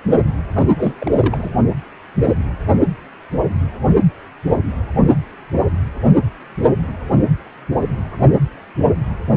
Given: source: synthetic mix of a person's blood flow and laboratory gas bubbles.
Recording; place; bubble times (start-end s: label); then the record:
Doppler ultrasound of blood flow; precordium
0.53-0.68 s: bubbles
0.76-0.94 s: bubbles
0.98-1.49 s: bubbles
From the record:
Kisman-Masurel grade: 212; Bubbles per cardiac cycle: several, 3 to 8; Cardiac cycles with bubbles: 1 to 10%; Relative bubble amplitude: moderate (0.250 to 0.450); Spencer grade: 1 (occasional bubble signal discernible with the cardiac motion signal, with majority of cardiac periods free of bubbles); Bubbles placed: anywhere in the cardiac cycle